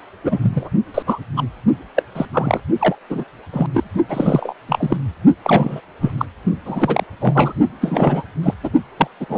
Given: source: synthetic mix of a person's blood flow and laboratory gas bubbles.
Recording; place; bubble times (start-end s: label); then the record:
Doppler ultrasound of blood flow; precordium
0.24-0.40 s: bubbles
0.42-0.69 s: bubbles
0.94-1.02 s: bubbles
1.06-1.19 s: bubbles
1.36-1.44 s: bubbles
1.96-2.03 s: bubbles
2.15-2.26 s: bubbles
2.33-2.60 s: bubbles
2.80-2.95 s: bubbles
3.10-3.24 s: bubbles
3.53-3.66 s: bubbles
3.74-3.84 s: bubbles
4.09-4.53 s: bubbles
4.69-4.98 s: bubbles
5.44-5.81 s: bubbles
6.02-6.12 s: bubbles
6.17-6.25 s: bubbles
6.65-7.04 s: bubbles
7.19-7.53 s: bubbles
7.81-8.23 s: bubbles
8.43-8.54 s: bubbles
8.63-8.70 s: bubbles
8.97-9.07 s: bubbles
9.20-9.25 s: bubbles
9.29-9.37 s: bubbles
From the record:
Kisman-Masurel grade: 243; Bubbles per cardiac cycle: several, 3 to 8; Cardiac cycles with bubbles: 100%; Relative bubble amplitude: loud (0.450 to 0.775); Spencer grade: 3 (all of the cardiac periods contain showers or single bubble signals, but not dominating or overriding the cardiac motion signals); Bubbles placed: only in the low amplitude regions of the cardiac cycle